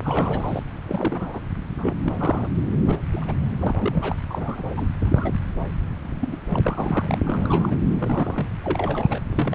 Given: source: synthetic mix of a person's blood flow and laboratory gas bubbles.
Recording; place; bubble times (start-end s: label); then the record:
Doppler ultrasound of blood flow; subclavian vein
0.02-0.63 s: bubbles
0.87-1.40 s: bubbles
1.77-1.95 s: bubbles
2.04-2.48 s: bubbles
2.86-2.99 s: bubbles
3.12-3.34 s: bubbles
3.59-4.16 s: bubbles
4.30-4.62 s: bubbles
4.76-4.88 s: bubbles
5.00-5.33 s: bubbles
6.21-6.37 s: bubbles
6.51-6.58 s: bubbles
6.62-7.19 s: bubbles
7.24-7.76 s: bubbles
7.99-8.51 s: bubbles
8.63-9.21 s: bubbles
9.30-9.55 s: bubbles
From the record:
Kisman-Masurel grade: 242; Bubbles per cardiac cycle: several, 3 to 8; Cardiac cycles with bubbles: 100%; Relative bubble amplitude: moderate (0.250 to 0.450); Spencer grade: 3 (all of the cardiac periods contain showers or single bubble signals, but not dominating or overriding the cardiac motion signals); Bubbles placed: anywhere in the cardiac cycle